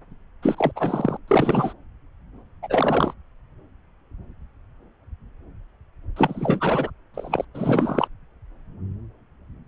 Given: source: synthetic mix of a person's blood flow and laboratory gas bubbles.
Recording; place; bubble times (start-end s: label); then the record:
Doppler ultrasound of blood flow; subclavian vein
0.42-0.72 s: bubbles
0.76-1.17 s: bubbles
1.27-1.73 s: bubbles
2.62-3.14 s: bubbles
6.16-6.90 s: bubbles
7.14-7.45 s: bubbles
7.54-8.07 s: bubbles
From the record:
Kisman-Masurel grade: 332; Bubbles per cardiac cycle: rolling drumbeat, 9 or more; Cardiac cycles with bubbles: 50 to 99%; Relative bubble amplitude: moderate (0.250 to 0.450); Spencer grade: 3 (all of the cardiac periods contain showers or single bubble signals, but not dominating or overriding the cardiac motion signals); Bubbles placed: anywhere in the cardiac cycle